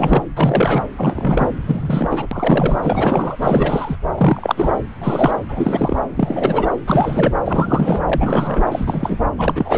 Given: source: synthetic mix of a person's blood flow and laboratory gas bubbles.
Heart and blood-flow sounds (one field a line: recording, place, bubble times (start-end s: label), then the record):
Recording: Doppler ultrasound of blood flow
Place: subclavian vein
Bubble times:
0.00-0.23 s: bubbles
0.36-0.83 s: bubbles
0.96-1.47 s: bubbles
1.65-2.27 s: bubbles
2.31-2.77 s: bubbles
2.82-3.36 s: bubbles
3.42-3.97 s: bubbles
4.17-4.70 s: bubbles
5.02-5.33 s: bubbles
5.49-6.03 s: bubbles
6.16-6.71 s: bubbles
6.87-7.34 s: bubbles
7.45-8.02 s: bubbles
8.05-8.61 s: bubbles
8.71-9.19 s: bubbles
9.38-9.78 s: bubbles
From the record:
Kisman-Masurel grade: 342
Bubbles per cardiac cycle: rolling drumbeat, 9 or more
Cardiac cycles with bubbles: 100%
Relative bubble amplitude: moderate (0.250 to 0.450)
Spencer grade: 3 (all of the cardiac periods contain showers or single bubble signals, but not dominating or overriding the cardiac motion signals)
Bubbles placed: anywhere in the cardiac cycle